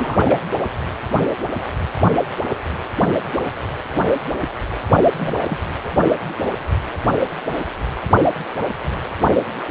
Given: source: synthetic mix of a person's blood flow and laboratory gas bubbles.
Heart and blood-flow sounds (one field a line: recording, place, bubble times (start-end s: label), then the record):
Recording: Doppler ultrasound of blood flow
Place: precordium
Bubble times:
0.00-0.19 s: bubbles
0.24-0.40 s: bubbles
5.15-5.57 s: bubbles
5.84-5.90 s: bubbles
From the record:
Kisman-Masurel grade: 221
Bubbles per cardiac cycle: several, 3 to 8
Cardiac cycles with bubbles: 10 to 50%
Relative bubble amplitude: barely perceptible (0.100 to 0.250)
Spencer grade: 2 (many but less than half of the cardiac periods contain bubble signals, singularly or in groups)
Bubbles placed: only in the low amplitude regions of the cardiac cycle